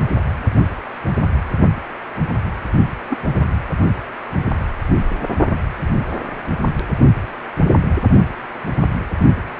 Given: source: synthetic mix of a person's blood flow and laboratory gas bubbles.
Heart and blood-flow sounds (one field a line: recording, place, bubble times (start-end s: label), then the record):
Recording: Doppler ultrasound of blood flow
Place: precordium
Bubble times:
3.10-3.19 s: bubbles
3.33-3.52 s: bubbles
From the record:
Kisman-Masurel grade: 212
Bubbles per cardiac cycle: several, 3 to 8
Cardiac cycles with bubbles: 1 to 10%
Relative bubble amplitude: moderate (0.250 to 0.450)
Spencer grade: 1 (occasional bubble signal discernible with the cardiac motion signal, with majority of cardiac periods free of bubbles)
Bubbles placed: only in the low amplitude regions of the cardiac cycle